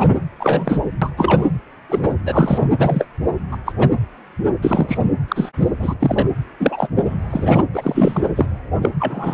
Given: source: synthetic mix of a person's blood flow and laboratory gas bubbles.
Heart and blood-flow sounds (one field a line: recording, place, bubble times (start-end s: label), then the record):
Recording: Doppler ultrasound of blood flow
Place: precordium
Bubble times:
0.00-0.18 s: bubbles
0.40-0.81 s: bubbles
1.02-1.09 s: bubbles
1.17-1.46 s: bubbles
1.89-2.14 s: bubbles
2.25-2.67 s: bubbles
2.78-3.06 s: bubbles
3.51-3.57 s: bubbles
3.65-3.73 s: bubbles
3.78-3.89 s: bubbles
4.62-4.98 s: bubbles
5.28-5.49 s: bubbles
5.58-5.69 s: bubbles
5.79-5.95 s: bubbles
6.00-6.28 s: bubbles
6.60-6.89 s: bubbles
6.96-7.18 s: bubbles
7.31-7.66 s: bubbles
7.74-8.21 s: bubbles
8.35-8.46 s: bubbles
8.81-8.89 s: bubbles
8.99-9.34 s: bubbles
From the record:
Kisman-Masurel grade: 233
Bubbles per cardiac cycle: several, 3 to 8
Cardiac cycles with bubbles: 50 to 99%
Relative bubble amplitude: loud (0.450 to 0.775)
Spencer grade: 3 (all of the cardiac periods contain showers or single bubble signals, but not dominating or overriding the cardiac motion signals)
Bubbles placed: anywhere in the cardiac cycle